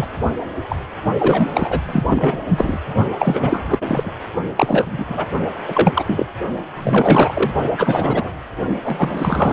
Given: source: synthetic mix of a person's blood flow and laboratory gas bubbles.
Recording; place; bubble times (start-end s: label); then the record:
Doppler ultrasound of blood flow; precordium
0.00-0.07 s: bubbles
0.68-0.76 s: bubbles
1.19-1.50 s: bubbles
1.54-1.81 s: bubbles
1.85-2.03 s: bubbles
2.09-2.80 s: bubbles
3.19-4.12 s: bubbles
4.56-5.25 s: bubbles
5.67-6.27 s: bubbles
6.75-7.51 s: bubbles
7.77-8.30 s: bubbles
8.83-9.53 s: bubbles
From the record:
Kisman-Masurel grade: 343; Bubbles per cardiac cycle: rolling drumbeat, 9 or more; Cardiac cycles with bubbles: 100%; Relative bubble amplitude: loud (0.450 to 0.775); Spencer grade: 3 (all of the cardiac periods contain showers or single bubble signals, but not dominating or overriding the cardiac motion signals); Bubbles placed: only in the low amplitude regions of the cardiac cycle